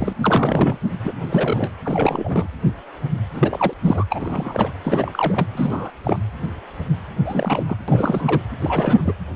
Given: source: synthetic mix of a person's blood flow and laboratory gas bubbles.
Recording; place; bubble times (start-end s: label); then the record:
Doppler ultrasound of blood flow; precordium
0.00-0.13 s: bubbles
0.23-0.79 s: bubbles
1.03-1.12 s: bubbles
1.30-1.71 s: bubbles
1.85-2.48 s: bubbles
3.33-3.73 s: bubbles
3.84-4.04 s: bubbles
4.09-4.70 s: bubbles
4.84-5.46 s: bubbles
5.54-5.90 s: bubbles
6.03-6.18 s: bubbles
7.24-7.78 s: bubbles
7.88-8.41 s: bubbles
8.61-9.12 s: bubbles
From the record:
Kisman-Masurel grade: 332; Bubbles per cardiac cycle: rolling drumbeat, 9 or more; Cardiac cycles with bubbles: 50 to 99%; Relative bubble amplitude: moderate (0.250 to 0.450); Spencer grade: 3 (all of the cardiac periods contain showers or single bubble signals, but not dominating or overriding the cardiac motion signals); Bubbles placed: anywhere in the cardiac cycle